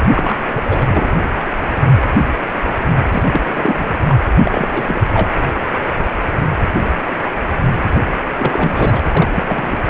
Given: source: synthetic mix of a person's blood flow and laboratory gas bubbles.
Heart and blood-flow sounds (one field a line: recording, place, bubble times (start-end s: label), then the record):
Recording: Doppler ultrasound of blood flow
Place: precordium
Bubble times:
0.15-0.39 s: bubbles
0.50-1.08 s: bubbles
3.12-3.42 s: bubbles
3.52-3.75 s: bubbles
3.78-3.93 s: bubbles
4.04-4.29 s: bubbles
4.43-4.68 s: bubbles
4.72-5.00 s: bubbles
5.13-5.29 s: bubbles
7.95-8.00 s: bubbles
8.38-9.02 s: bubbles
9.15-9.29 s: bubbles
9.34-9.80 s: bubbles
From the record:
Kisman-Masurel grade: 332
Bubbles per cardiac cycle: rolling drumbeat, 9 or more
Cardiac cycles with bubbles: 50 to 99%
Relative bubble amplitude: moderate (0.250 to 0.450)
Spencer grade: 3 (all of the cardiac periods contain showers or single bubble signals, but not dominating or overriding the cardiac motion signals)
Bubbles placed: anywhere in the cardiac cycle